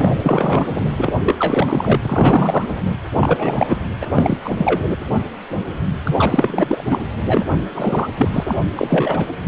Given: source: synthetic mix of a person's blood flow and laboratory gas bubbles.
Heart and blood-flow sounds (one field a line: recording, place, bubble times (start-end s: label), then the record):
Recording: Doppler ultrasound of blood flow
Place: precordium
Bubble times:
0.00-0.66 s: bubbles
0.96-1.13 s: bubbles
1.23-1.97 s: bubbles
2.02-2.70 s: bubbles
2.84-2.95 s: bubbles
3.20-3.77 s: bubbles
4.01-4.06 s: bubbles
4.13-4.38 s: bubbles
4.43-4.83 s: bubbles
6.04-6.84 s: bubbles
6.90-6.99 s: bubbles
7.25-7.45 s: bubbles
7.74-8.08 s: bubbles
8.17-8.29 s: bubbles
8.33-8.44 s: bubbles
8.47-8.56 s: bubbles
8.75-9.28 s: bubbles
From the record:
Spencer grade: 3 (all of the cardiac periods contain showers or single bubble signals, but not dominating or overriding the cardiac motion signals)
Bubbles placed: anywhere in the cardiac cycle